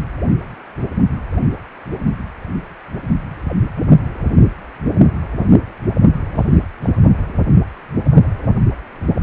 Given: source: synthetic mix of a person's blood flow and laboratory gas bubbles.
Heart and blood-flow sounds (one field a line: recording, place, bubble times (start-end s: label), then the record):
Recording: Doppler ultrasound of blood flow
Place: precordium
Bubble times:
6.31-6.60 s: bubbles
6.82-7.14 s: bubbles
From the record:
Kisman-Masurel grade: 211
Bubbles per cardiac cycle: several, 3 to 8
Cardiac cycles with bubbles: 1 to 10%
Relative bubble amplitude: barely perceptible (0.100 to 0.250)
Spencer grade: 1 (occasional bubble signal discernible with the cardiac motion signal, with majority of cardiac periods free of bubbles)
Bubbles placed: anywhere in the cardiac cycle